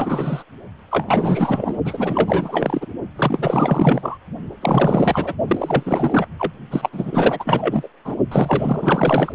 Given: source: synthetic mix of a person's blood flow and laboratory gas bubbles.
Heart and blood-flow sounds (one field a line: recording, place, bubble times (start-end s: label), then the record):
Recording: Doppler ultrasound of blood flow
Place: precordium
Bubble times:
0.00-0.43 s: bubbles
0.90-1.78 s: bubbles
1.84-2.86 s: bubbles
3.16-4.18 s: bubbles
4.61-5.34 s: bubbles
5.47-6.26 s: bubbles
6.39-6.52 s: bubbles
6.71-6.89 s: bubbles
6.92-7.88 s: bubbles
8.04-8.15 s: bubbles
8.31-9.32 s: bubbles
From the record:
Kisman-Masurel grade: 444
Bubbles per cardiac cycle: continuous sound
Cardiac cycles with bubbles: 100%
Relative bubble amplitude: maximal (0.775 to 0.999)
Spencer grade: 4 (maximum detectable bubble signal sounding continuously throughout systole and diastole of every cardiac period, and overriding the amplitude of the normal cardiac signals)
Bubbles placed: only in the low amplitude regions of the cardiac cycle